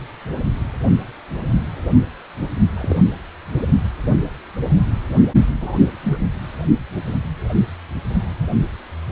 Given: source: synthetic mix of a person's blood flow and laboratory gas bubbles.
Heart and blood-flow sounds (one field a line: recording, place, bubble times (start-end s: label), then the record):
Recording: Doppler ultrasound of blood flow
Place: precordium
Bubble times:
2.74-2.97 s: bubbles
5.60-5.79 s: bubbles
6.03-6.18 s: bubbles
From the record:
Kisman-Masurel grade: 122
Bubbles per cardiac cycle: 1 to 2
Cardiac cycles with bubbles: 10 to 50%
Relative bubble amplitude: moderate (0.250 to 0.450)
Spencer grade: 2 (many but less than half of the cardiac periods contain bubble signals, singularly or in groups)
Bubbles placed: only in the low amplitude regions of the cardiac cycle